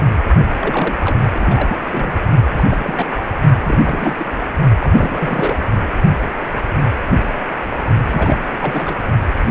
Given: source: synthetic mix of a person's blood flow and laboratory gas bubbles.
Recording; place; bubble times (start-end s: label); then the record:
Doppler ultrasound of blood flow; precordium
0.60-0.97 s: bubbles
1.04-1.19 s: bubbles
1.34-1.77 s: bubbles
1.91-2.21 s: bubbles
2.53-3.06 s: bubbles
3.16-3.25 s: bubbles
3.64-3.78 s: bubbles
3.85-4.14 s: bubbles
4.17-4.27 s: bubbles
4.80-5.62 s: bubbles
8.12-8.40 s: bubbles
8.43-9.03 s: bubbles
From the record:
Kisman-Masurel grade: 332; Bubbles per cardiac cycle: rolling drumbeat, 9 or more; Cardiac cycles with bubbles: 50 to 99%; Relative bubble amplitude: moderate (0.250 to 0.450); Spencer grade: 3 (all of the cardiac periods contain showers or single bubble signals, but not dominating or overriding the cardiac motion signals); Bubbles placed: only in the low amplitude regions of the cardiac cycle